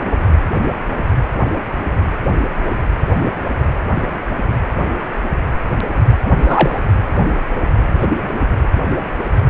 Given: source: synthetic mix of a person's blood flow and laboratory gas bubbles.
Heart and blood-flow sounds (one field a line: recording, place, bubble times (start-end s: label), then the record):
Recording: Doppler ultrasound of blood flow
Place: precordium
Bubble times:
6.42-6.80 s: bubbles
8.00-8.08 s: bubbles
From the record:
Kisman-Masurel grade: 113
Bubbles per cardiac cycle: 1 to 2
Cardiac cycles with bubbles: 1 to 10%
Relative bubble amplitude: loud (0.450 to 0.775)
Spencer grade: 1 (occasional bubble signal discernible with the cardiac motion signal, with majority of cardiac periods free of bubbles)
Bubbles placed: anywhere in the cardiac cycle